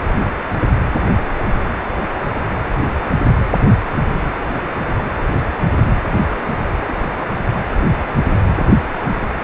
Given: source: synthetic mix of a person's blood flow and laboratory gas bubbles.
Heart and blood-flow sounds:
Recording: Doppler ultrasound of blood flow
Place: precordium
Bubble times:
4.48-4.65 s: bubbles
6.87-6.94 s: bubbles
7.46-7.54 s: bubbles
9.21-9.28 s: bubbles
From the record:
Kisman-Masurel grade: 121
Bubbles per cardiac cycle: 1 to 2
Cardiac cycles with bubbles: 10 to 50%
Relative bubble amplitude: barely perceptible (0.100 to 0.250)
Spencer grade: 2 (many but less than half of the cardiac periods contain bubble signals, singularly or in groups)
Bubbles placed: anywhere in the cardiac cycle

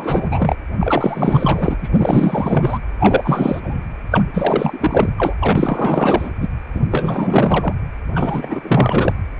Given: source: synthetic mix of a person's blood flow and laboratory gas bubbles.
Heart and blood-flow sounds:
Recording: Doppler ultrasound of blood flow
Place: precordium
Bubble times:
0.00-0.55 s: bubbles
0.79-1.76 s: bubbles
1.82-2.79 s: bubbles
2.99-3.60 s: bubbles
3.62-3.86 s: bubbles
4.10-4.22 s: bubbles
4.33-5.11 s: bubbles
5.17-5.35 s: bubbles
5.40-6.29 s: bubbles
6.41-6.49 s: bubbles
6.74-6.80 s: bubbles
6.91-7.73 s: bubbles
8.14-9.13 s: bubbles
From the record:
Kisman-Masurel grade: 444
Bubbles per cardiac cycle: continuous sound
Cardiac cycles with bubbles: 100%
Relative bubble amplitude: maximal (0.775 to 0.999)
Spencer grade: 4 (maximum detectable bubble signal sounding continuously throughout systole and diastole of every cardiac period, and overriding the amplitude of the normal cardiac signals)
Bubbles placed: anywhere in the cardiac cycle

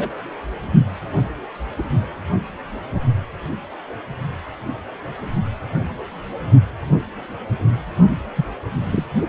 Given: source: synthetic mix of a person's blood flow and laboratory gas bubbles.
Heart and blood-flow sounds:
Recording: Doppler ultrasound of blood flow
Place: precordium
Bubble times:
0.00-0.09 s: bubbles
1.78-1.82 s: bubbles
8.36-8.45 s: bubbles
8.83-9.05 s: bubbles
From the record:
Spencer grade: 2 (many but less than half of the cardiac periods contain bubble signals, singularly or in groups)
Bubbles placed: only in the low amplitude regions of the cardiac cycle

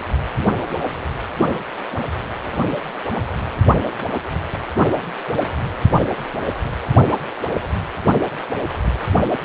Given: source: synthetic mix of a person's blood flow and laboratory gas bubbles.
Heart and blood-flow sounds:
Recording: Doppler ultrasound of blood flow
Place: precordium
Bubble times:
no bubbles
From the record:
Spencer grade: 0 (complete lack of bubble signals)

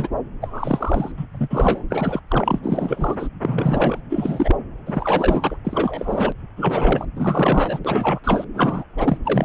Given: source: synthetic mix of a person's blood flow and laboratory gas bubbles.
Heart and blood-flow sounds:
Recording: Doppler ultrasound of blood flow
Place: subclavian vein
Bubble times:
0.00-0.08 s: bubbles
0.42-1.12 s: bubbles
1.17-1.26 s: bubbles
1.32-1.48 s: bubbles
1.50-1.84 s: bubbles
1.90-2.19 s: bubbles
2.30-2.59 s: bubbles
2.62-3.27 s: bubbles
3.41-4.00 s: bubbles
4.10-4.56 s: bubbles
4.87-5.57 s: bubbles
5.65-6.33 s: bubbles
6.57-7.06 s: bubbles
7.16-7.79 s: bubbles
7.84-8.19 s: bubbles
8.23-8.44 s: bubbles
8.54-8.84 s: bubbles
8.97-9.17 s: bubbles
9.25-9.45 s: bubbles
From the record:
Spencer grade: 3 (all of the cardiac periods contain showers or single bubble signals, but not dominating or overriding the cardiac motion signals)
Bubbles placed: anywhere in the cardiac cycle

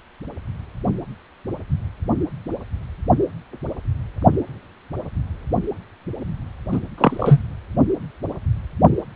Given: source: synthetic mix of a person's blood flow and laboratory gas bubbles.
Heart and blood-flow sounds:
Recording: Doppler ultrasound of blood flow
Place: precordium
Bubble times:
6.71-6.80 s: bubbles
6.98-7.42 s: bubbles
From the record:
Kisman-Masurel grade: 223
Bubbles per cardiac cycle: several, 3 to 8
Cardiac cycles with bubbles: 10 to 50%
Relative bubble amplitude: loud (0.450 to 0.775)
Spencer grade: 2 (many but less than half of the cardiac periods contain bubble signals, singularly or in groups)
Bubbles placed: anywhere in the cardiac cycle

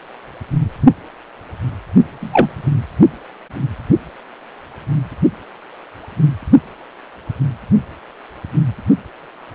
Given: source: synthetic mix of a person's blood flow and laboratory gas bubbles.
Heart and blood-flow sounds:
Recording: Doppler ultrasound of blood flow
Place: precordium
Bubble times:
2.19-2.67 s: bubbles
From the record:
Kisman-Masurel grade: 123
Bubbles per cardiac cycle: 1 to 2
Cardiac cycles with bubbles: 10 to 50%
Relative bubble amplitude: loud (0.450 to 0.775)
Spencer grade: 2 (many but less than half of the cardiac periods contain bubble signals, singularly or in groups)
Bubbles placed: anywhere in the cardiac cycle

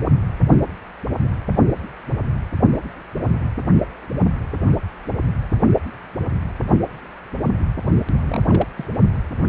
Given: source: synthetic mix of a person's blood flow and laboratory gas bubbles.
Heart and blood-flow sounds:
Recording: Doppler ultrasound of blood flow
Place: precordium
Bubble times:
8.21-8.45 s: bubbles
8.48-8.68 s: bubbles
8.77-8.86 s: bubbles
From the record:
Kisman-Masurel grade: 211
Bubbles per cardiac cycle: several, 3 to 8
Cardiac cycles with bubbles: 1 to 10%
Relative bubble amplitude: barely perceptible (0.100 to 0.250)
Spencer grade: 1 (occasional bubble signal discernible with the cardiac motion signal, with majority of cardiac periods free of bubbles)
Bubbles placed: only in the low amplitude regions of the cardiac cycle

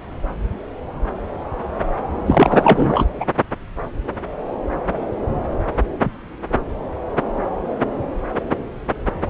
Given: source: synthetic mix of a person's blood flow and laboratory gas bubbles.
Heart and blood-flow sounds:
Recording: Doppler ultrasound of blood flow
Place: subclavian vein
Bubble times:
2.26-3.05 s: bubbles
3.20-3.26 s: bubbles
From the record:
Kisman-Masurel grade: 213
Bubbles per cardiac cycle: several, 3 to 8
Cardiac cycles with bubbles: 1 to 10%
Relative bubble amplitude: loud (0.450 to 0.775)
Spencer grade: 1 (occasional bubble signal discernible with the cardiac motion signal, with majority of cardiac periods free of bubbles)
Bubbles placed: anywhere in the cardiac cycle

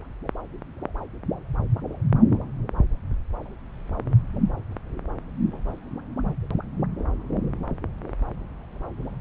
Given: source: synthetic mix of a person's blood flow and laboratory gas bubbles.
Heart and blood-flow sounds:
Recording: Doppler ultrasound of blood flow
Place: subclavian vein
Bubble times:
no bubbles
From the record:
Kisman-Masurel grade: 000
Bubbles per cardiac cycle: 0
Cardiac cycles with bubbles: 0%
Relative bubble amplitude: no bubbles discernible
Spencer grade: 0 (complete lack of bubble signals)

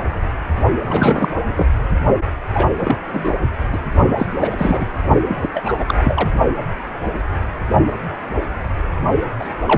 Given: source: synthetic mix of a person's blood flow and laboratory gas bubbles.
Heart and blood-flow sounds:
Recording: Doppler ultrasound of blood flow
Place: precordium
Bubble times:
0.85-1.28 s: bubbles
1.47-1.53 s: bubbles
1.55-1.66 s: bubbles
2.54-2.67 s: bubbles
2.77-2.96 s: bubbles
3.06-3.35 s: bubbles
3.72-3.79 s: bubbles
4.17-4.27 s: bubbles
4.37-4.85 s: bubbles
5.22-5.48 s: bubbles
5.53-5.84 s: bubbles
5.88-5.94 s: bubbles
5.97-6.29 s: bubbles
9.39-9.50 s: bubbles
9.66-9.78 s: bubbles
From the record:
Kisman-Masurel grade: 333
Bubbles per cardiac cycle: rolling drumbeat, 9 or more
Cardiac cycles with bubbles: 50 to 99%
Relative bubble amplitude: loud (0.450 to 0.775)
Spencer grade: 3 (all of the cardiac periods contain showers or single bubble signals, but not dominating or overriding the cardiac motion signals)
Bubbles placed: only in the low amplitude regions of the cardiac cycle

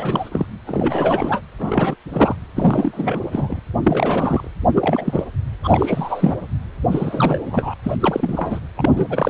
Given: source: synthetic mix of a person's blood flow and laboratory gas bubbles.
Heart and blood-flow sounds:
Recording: Doppler ultrasound of blood flow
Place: precordium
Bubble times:
0.00-0.45 s: bubbles
0.66-1.42 s: bubbles
1.58-1.96 s: bubbles
2.12-2.35 s: bubbles
2.55-3.21 s: bubbles
3.31-3.59 s: bubbles
3.84-4.50 s: bubbles
4.74-5.25 s: bubbles
5.64-6.46 s: bubbles
6.91-7.74 s: bubbles
7.83-7.96 s: bubbles
8.00-8.59 s: bubbles
8.75-9.07 s: bubbles
9.09-9.30 s: bubbles
From the record:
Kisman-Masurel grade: 342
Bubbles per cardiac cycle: rolling drumbeat, 9 or more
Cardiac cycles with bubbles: 100%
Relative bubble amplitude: moderate (0.250 to 0.450)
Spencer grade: 3 (all of the cardiac periods contain showers or single bubble signals, but not dominating or overriding the cardiac motion signals)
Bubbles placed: anywhere in the cardiac cycle

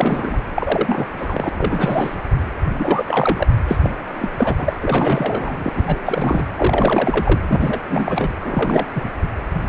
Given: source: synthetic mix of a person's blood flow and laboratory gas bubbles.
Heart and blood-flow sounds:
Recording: Doppler ultrasound of blood flow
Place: precordium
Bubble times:
0.00-0.38 s: bubbles
0.55-1.10 s: bubbles
1.16-1.49 s: bubbles
1.55-2.21 s: bubbles
2.77-3.47 s: bubbles
3.67-3.77 s: bubbles
3.82-3.91 s: bubbles
4.14-4.30 s: bubbles
4.38-4.73 s: bubbles
4.81-5.70 s: bubbles
5.76-6.00 s: bubbles
6.06-6.47 s: bubbles
6.57-7.41 s: bubbles
7.48-7.81 s: bubbles
7.89-8.29 s: bubbles
8.41-8.86 s: bubbles
8.95-9.11 s: bubbles
From the record:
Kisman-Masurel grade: 342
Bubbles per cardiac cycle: rolling drumbeat, 9 or more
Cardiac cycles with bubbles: 100%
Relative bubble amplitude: moderate (0.250 to 0.450)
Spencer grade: 3 (all of the cardiac periods contain showers or single bubble signals, but not dominating or overriding the cardiac motion signals)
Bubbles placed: anywhere in the cardiac cycle

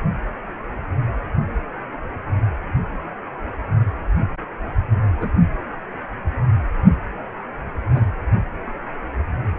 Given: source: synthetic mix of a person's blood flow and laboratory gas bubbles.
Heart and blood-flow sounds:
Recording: Doppler ultrasound of blood flow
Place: precordium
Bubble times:
5.21-5.31 s: bubbles
7.93-8.10 s: bubbles
From the record:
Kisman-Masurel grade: 122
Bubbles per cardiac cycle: 1 to 2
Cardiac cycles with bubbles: 10 to 50%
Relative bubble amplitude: moderate (0.250 to 0.450)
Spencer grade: 2 (many but less than half of the cardiac periods contain bubble signals, singularly or in groups)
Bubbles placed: only in the low amplitude regions of the cardiac cycle

